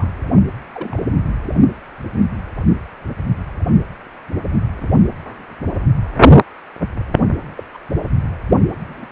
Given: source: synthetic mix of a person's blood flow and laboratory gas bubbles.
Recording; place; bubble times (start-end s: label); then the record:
Doppler ultrasound of blood flow; precordium
0.00-0.12 s: bubbles
0.72-1.02 s: bubbles
2.13-2.18 s: bubbles
7.57-7.64 s: bubbles
7.74-7.78 s: bubbles
8.88-9.06 s: bubbles
From the record:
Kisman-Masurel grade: 121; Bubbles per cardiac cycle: 1 to 2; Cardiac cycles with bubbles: 10 to 50%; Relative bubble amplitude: barely perceptible (0.100 to 0.250); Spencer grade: 2 (many but less than half of the cardiac periods contain bubble signals, singularly or in groups); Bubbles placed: anywhere in the cardiac cycle